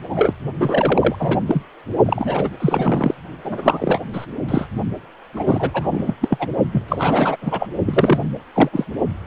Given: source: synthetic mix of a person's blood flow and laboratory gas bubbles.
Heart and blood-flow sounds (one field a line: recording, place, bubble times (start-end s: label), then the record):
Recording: Doppler ultrasound of blood flow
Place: precordium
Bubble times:
0.02-0.34 s: bubbles
0.60-1.16 s: bubbles
1.19-1.40 s: bubbles
1.47-1.62 s: bubbles
2.05-2.49 s: bubbles
2.60-3.15 s: bubbles
3.44-4.00 s: bubbles
4.13-4.26 s: bubbles
4.49-4.67 s: bubbles
5.36-5.71 s: bubbles
5.74-6.14 s: bubbles
6.20-6.49 s: bubbles
6.72-6.83 s: bubbles
6.88-7.37 s: bubbles
7.41-7.67 s: bubbles
7.86-8.19 s: bubbles
8.54-8.69 s: bubbles
8.72-8.85 s: bubbles
From the record:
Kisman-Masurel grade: 343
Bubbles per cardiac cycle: rolling drumbeat, 9 or more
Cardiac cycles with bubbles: 100%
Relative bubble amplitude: loud (0.450 to 0.775)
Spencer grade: 3 (all of the cardiac periods contain showers or single bubble signals, but not dominating or overriding the cardiac motion signals)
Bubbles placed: only in the low amplitude regions of the cardiac cycle